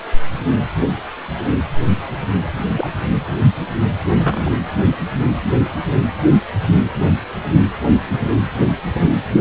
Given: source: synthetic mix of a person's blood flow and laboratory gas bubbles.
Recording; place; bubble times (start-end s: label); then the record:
Doppler ultrasound of blood flow; precordium
2.76-2.90 s: bubbles
4.18-4.55 s: bubbles
4.82-4.89 s: bubbles
From the record:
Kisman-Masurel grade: 122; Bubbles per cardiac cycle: 1 to 2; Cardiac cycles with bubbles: 10 to 50%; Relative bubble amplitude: moderate (0.250 to 0.450); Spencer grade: 2 (many but less than half of the cardiac periods contain bubble signals, singularly or in groups); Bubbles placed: anywhere in the cardiac cycle